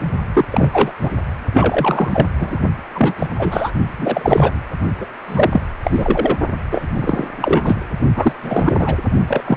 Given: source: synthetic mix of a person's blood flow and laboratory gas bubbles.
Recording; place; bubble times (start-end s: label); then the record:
Doppler ultrasound of blood flow; precordium
0.34-0.46 s: bubbles
0.50-0.92 s: bubbles
1.02-1.11 s: bubbles
1.54-2.28 s: bubbles
2.39-2.59 s: bubbles
2.94-3.14 s: bubbles
3.18-3.26 s: bubbles
3.36-3.72 s: bubbles
3.98-4.61 s: bubbles
5.00-5.06 s: bubbles
5.27-5.62 s: bubbles
5.84-6.37 s: bubbles
6.71-6.88 s: bubbles
6.96-7.27 s: bubbles
7.36-7.77 s: bubbles
8.15-8.33 s: bubbles
8.42-8.96 s: bubbles
9.27-9.56 s: bubbles
From the record:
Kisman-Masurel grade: 333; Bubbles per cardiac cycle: rolling drumbeat, 9 or more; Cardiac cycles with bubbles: 50 to 99%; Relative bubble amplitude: loud (0.450 to 0.775); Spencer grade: 3 (all of the cardiac periods contain showers or single bubble signals, but not dominating or overriding the cardiac motion signals); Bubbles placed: only in the low amplitude regions of the cardiac cycle